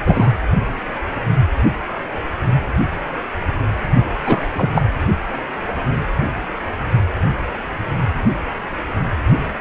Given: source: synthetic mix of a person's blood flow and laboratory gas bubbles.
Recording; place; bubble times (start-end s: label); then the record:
Doppler ultrasound of blood flow; precordium
0.04-0.31 s: bubbles
4.24-4.43 s: bubbles
4.55-4.83 s: bubbles
From the record:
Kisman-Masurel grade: 223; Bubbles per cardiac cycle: several, 3 to 8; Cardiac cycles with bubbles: 10 to 50%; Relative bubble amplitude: loud (0.450 to 0.775); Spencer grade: 2 (many but less than half of the cardiac periods contain bubble signals, singularly or in groups); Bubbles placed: only in the low amplitude regions of the cardiac cycle